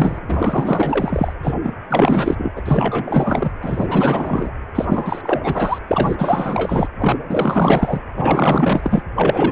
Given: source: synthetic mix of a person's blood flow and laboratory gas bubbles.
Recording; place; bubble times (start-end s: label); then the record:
Doppler ultrasound of blood flow; precordium
0.00-0.20 s: bubbles
0.28-1.33 s: bubbles
1.42-1.55 s: bubbles
1.63-1.74 s: bubbles
1.90-2.52 s: bubbles
2.56-2.61 s: bubbles
2.65-3.54 s: bubbles
3.62-4.52 s: bubbles
4.75-5.41 s: bubbles
5.43-5.79 s: bubbles
5.88-6.88 s: bubbles
6.98-7.17 s: bubbles
7.29-8.02 s: bubbles
8.16-9.03 s: bubbles
9.15-9.52 s: bubbles
From the record:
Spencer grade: 4 (maximum detectable bubble signal sounding continuously throughout systole and diastole of every cardiac period, and overriding the amplitude of the normal cardiac signals); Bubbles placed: anywhere in the cardiac cycle